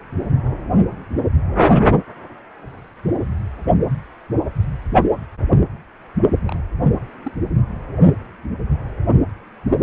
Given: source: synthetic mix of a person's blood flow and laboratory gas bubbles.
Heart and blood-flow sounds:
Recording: Doppler ultrasound of blood flow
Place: precordium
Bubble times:
6.44-6.60 s: bubbles
7.24-7.31 s: bubbles
From the record:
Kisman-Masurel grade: 211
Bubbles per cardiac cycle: several, 3 to 8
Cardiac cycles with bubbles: 1 to 10%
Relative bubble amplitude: barely perceptible (0.100 to 0.250)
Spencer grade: 1 (occasional bubble signal discernible with the cardiac motion signal, with majority of cardiac periods free of bubbles)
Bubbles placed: only in the low amplitude regions of the cardiac cycle

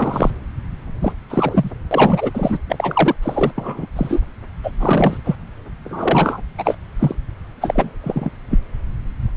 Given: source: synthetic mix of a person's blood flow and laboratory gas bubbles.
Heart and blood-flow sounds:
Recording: Doppler ultrasound of blood flow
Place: subclavian vein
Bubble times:
0.00-0.31 s: bubbles
1.02-1.14 s: bubbles
1.30-1.71 s: bubbles
1.91-2.31 s: bubbles
2.33-2.58 s: bubbles
2.69-3.15 s: bubbles
3.22-3.52 s: bubbles
3.58-3.86 s: bubbles
3.95-4.22 s: bubbles
4.63-4.71 s: bubbles
4.79-5.17 s: bubbles
5.24-5.35 s: bubbles
5.84-6.41 s: bubbles
6.58-6.75 s: bubbles
6.99-7.15 s: bubbles
7.61-7.89 s: bubbles
8.02-8.30 s: bubbles
8.50-8.59 s: bubbles
From the record:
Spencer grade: 3 (all of the cardiac periods contain showers or single bubble signals, but not dominating or overriding the cardiac motion signals)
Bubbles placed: anywhere in the cardiac cycle

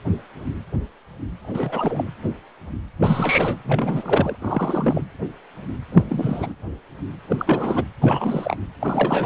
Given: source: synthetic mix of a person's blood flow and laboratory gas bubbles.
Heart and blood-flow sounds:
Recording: Doppler ultrasound of blood flow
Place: precordium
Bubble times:
1.43-2.12 s: bubbles
2.99-3.57 s: bubbles
3.64-4.36 s: bubbles
4.39-5.07 s: bubbles
5.92-6.54 s: bubbles
7.29-7.84 s: bubbles
8.01-8.58 s: bubbles
8.81-9.26 s: bubbles
From the record:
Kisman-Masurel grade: 332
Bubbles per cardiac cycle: rolling drumbeat, 9 or more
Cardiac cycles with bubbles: 50 to 99%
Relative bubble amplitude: moderate (0.250 to 0.450)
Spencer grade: 3 (all of the cardiac periods contain showers or single bubble signals, but not dominating or overriding the cardiac motion signals)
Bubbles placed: anywhere in the cardiac cycle

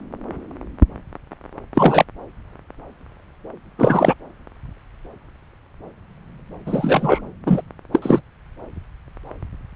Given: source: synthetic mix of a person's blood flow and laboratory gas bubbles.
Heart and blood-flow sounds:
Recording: Doppler ultrasound of blood flow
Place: subclavian vein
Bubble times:
1.74-2.04 s: bubbles
3.77-4.15 s: bubbles
6.66-7.21 s: bubbles
7.46-7.62 s: bubbles
7.92-8.00 s: bubbles
8.02-8.21 s: bubbles
From the record:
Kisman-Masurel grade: 223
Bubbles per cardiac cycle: several, 3 to 8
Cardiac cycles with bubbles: 10 to 50%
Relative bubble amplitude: loud (0.450 to 0.775)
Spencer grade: 2 (many but less than half of the cardiac periods contain bubble signals, singularly or in groups)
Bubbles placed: anywhere in the cardiac cycle

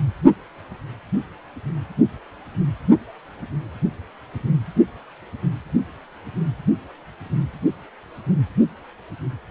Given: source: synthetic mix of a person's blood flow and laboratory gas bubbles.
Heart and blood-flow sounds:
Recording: Doppler ultrasound of blood flow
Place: precordium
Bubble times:
no bubbles
From the record:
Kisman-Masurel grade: 000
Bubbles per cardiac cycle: 0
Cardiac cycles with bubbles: 0%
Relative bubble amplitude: no bubbles discernible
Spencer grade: 0 (complete lack of bubble signals)

